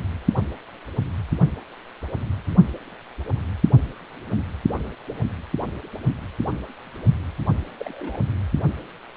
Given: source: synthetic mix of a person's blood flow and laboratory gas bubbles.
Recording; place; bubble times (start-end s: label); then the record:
Doppler ultrasound of blood flow; precordium
7.80-8.19 s: bubbles
From the record:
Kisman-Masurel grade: 111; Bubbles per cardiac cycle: 1 to 2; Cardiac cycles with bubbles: 1 to 10%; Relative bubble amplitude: barely perceptible (0.100 to 0.250); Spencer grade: 1 (occasional bubble signal discernible with the cardiac motion signal, with majority of cardiac periods free of bubbles); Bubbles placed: anywhere in the cardiac cycle